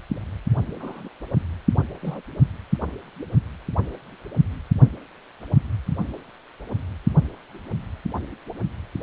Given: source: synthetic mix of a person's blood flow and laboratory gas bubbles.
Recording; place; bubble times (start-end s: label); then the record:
Doppler ultrasound of blood flow; precordium
0.80-1.08 s: bubbles
2.02-2.20 s: bubbles
From the record:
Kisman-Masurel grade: 121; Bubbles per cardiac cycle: 1 to 2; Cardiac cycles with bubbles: 10 to 50%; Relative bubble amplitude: barely perceptible (0.100 to 0.250); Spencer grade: 2 (many but less than half of the cardiac periods contain bubble signals, singularly or in groups); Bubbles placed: only in the low amplitude regions of the cardiac cycle